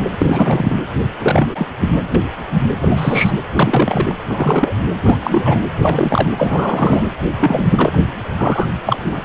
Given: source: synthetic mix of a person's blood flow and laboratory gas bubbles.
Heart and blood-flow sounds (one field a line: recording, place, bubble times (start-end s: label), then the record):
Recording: Doppler ultrasound of blood flow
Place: precordium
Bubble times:
0.19-0.76 s: bubbles
1.19-1.48 s: bubbles
1.55-1.68 s: bubbles
1.80-1.88 s: bubbles
2.15-2.23 s: bubbles
2.80-3.32 s: bubbles
3.53-4.15 s: bubbles
4.29-4.74 s: bubbles
5.02-5.60 s: bubbles
5.81-6.28 s: bubbles
6.37-7.04 s: bubbles
7.39-7.99 s: bubbles
8.37-8.67 s: bubbles
8.86-9.20 s: bubbles
From the record:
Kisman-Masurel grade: 243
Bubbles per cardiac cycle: several, 3 to 8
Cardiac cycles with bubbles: 100%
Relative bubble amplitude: loud (0.450 to 0.775)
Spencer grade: 3 (all of the cardiac periods contain showers or single bubble signals, but not dominating or overriding the cardiac motion signals)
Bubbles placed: anywhere in the cardiac cycle